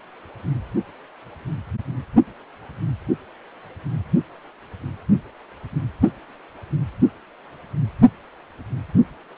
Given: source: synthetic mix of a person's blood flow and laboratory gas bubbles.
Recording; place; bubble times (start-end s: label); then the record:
Doppler ultrasound of blood flow; precordium
no bubbles
From the record:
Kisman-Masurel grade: 000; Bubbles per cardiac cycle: 0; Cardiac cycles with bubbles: 0%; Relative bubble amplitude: no bubbles discernible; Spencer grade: 0 (complete lack of bubble signals)